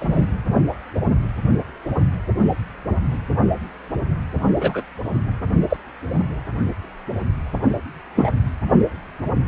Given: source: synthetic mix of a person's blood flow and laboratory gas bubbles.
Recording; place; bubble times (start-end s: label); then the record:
Doppler ultrasound of blood flow; precordium
0.00-0.25 s: bubbles
4.59-4.82 s: bubbles
5.69-5.77 s: bubbles
6.12-6.21 s: bubbles
8.16-8.33 s: bubbles
From the record:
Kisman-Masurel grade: 123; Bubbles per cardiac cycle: 1 to 2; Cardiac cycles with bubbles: 10 to 50%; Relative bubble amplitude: loud (0.450 to 0.775); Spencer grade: 2 (many but less than half of the cardiac periods contain bubble signals, singularly or in groups); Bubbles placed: only in the low amplitude regions of the cardiac cycle